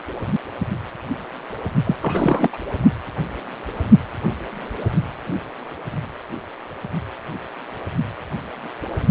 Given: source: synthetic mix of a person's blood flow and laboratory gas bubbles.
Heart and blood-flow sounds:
Doppler ultrasound of blood flow; precordium
1.84-1.96 s: bubbles
2.02-2.49 s: bubbles
2.53-2.58 s: bubbles
From the record:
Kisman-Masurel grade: 212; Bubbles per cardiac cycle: several, 3 to 8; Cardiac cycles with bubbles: 1 to 10%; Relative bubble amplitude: moderate (0.250 to 0.450); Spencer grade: 1 (occasional bubble signal discernible with the cardiac motion signal, with majority of cardiac periods free of bubbles); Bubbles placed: only in the low amplitude regions of the cardiac cycle

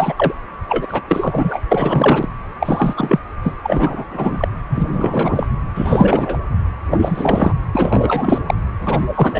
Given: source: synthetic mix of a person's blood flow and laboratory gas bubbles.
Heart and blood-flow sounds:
Doppler ultrasound of blood flow; precordium
0.00-0.13 s: bubbles
0.18-0.33 s: bubbles
0.69-1.02 s: bubbles
1.08-1.61 s: bubbles
1.71-2.29 s: bubbles
2.60-3.19 s: bubbles
3.43-3.52 s: bubbles
3.63-4.05 s: bubbles
4.10-4.48 s: bubbles
4.69-5.46 s: bubbles
5.74-6.38 s: bubbles
6.90-7.53 s: bubbles
7.72-8.41 s: bubbles
8.47-8.54 s: bubbles
8.80-9.11 s: bubbles
9.14-9.40 s: bubbles
From the record:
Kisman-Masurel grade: 343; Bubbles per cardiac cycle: rolling drumbeat, 9 or more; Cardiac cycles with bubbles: 100%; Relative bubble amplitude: loud (0.450 to 0.775); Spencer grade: 3 (all of the cardiac periods contain showers or single bubble signals, but not dominating or overriding the cardiac motion signals); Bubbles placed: anywhere in the cardiac cycle

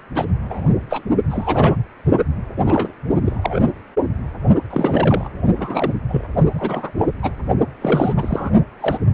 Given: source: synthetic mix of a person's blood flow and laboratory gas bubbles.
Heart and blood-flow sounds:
Doppler ultrasound of blood flow; precordium
0.15-0.25 s: bubbles
0.45-0.74 s: bubbles
0.90-1.02 s: bubbles
1.29-1.75 s: bubbles
2.57-2.92 s: bubbles
3.25-3.60 s: bubbles
3.67-3.71 s: bubbles
4.69-5.29 s: bubbles
5.57-5.92 s: bubbles
6.08-6.27 s: bubbles
6.54-6.91 s: bubbles
6.98-7.08 s: bubbles
7.22-7.32 s: bubbles
7.81-8.14 s: bubbles
8.16-8.50 s: bubbles
8.80-8.98 s: bubbles
From the record:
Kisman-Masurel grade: 242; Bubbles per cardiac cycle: several, 3 to 8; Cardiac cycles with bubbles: 100%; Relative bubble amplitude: moderate (0.250 to 0.450); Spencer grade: 3 (all of the cardiac periods contain showers or single bubble signals, but not dominating or overriding the cardiac motion signals); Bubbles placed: only in the low amplitude regions of the cardiac cycle

